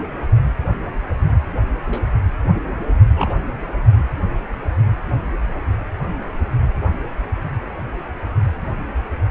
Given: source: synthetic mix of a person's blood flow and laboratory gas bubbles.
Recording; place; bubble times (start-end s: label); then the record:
Doppler ultrasound of blood flow; precordium
1.87-2.02 s: bubbles
3.16-3.43 s: bubbles
From the record:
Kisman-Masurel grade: 112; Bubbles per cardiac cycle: 1 to 2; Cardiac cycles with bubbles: 1 to 10%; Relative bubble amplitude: moderate (0.250 to 0.450); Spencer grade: 1 (occasional bubble signal discernible with the cardiac motion signal, with majority of cardiac periods free of bubbles); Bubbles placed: anywhere in the cardiac cycle